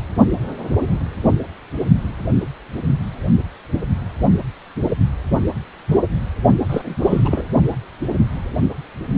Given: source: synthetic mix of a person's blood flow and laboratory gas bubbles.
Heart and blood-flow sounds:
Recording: Doppler ultrasound of blood flow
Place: precordium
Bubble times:
6.69-7.47 s: bubbles
From the record:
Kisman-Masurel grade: 212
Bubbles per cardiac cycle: several, 3 to 8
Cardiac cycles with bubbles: 1 to 10%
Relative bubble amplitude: moderate (0.250 to 0.450)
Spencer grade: 1 (occasional bubble signal discernible with the cardiac motion signal, with majority of cardiac periods free of bubbles)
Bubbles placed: only in the low amplitude regions of the cardiac cycle

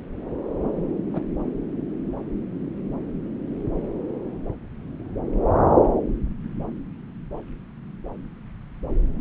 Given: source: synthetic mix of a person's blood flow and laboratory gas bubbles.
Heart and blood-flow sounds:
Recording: Doppler ultrasound of blood flow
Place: subclavian vein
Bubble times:
1.13-1.21 s: bubbles
From the record:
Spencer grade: 2 (many but less than half of the cardiac periods contain bubble signals, singularly or in groups)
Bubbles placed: anywhere in the cardiac cycle

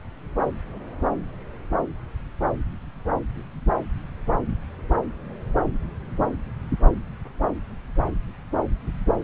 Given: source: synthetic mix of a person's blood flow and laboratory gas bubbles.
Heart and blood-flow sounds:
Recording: Doppler ultrasound of blood flow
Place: subclavian vein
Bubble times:
no bubbles
From the record:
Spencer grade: 0 (complete lack of bubble signals)

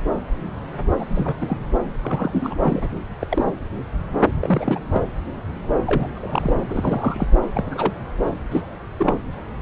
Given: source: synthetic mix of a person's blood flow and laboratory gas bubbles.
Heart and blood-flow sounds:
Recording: Doppler ultrasound of blood flow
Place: subclavian vein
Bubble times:
0.99-1.05 s: bubbles
1.10-1.38 s: bubbles
1.41-1.56 s: bubbles
2.03-2.89 s: bubbles
3.21-3.44 s: bubbles
4.42-4.79 s: bubbles
4.94-5.03 s: bubbles
5.86-6.08 s: bubbles
6.15-6.54 s: bubbles
6.68-7.27 s: bubbles
7.55-7.64 s: bubbles
7.71-7.93 s: bubbles
8.51-8.62 s: bubbles
8.98-9.20 s: bubbles
From the record:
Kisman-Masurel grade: 232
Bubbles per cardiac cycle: several, 3 to 8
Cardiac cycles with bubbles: 50 to 99%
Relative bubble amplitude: moderate (0.250 to 0.450)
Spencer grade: 3 (all of the cardiac periods contain showers or single bubble signals, but not dominating or overriding the cardiac motion signals)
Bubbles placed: anywhere in the cardiac cycle

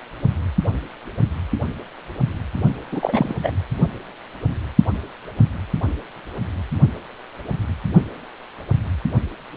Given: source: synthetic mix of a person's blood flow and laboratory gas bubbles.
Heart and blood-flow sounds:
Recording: Doppler ultrasound of blood flow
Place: precordium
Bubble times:
2.92-3.33 s: bubbles
3.43-3.52 s: bubbles
From the record:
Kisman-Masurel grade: 213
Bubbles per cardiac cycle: several, 3 to 8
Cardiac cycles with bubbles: 1 to 10%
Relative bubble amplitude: loud (0.450 to 0.775)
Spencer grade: 1 (occasional bubble signal discernible with the cardiac motion signal, with majority of cardiac periods free of bubbles)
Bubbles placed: only in the low amplitude regions of the cardiac cycle

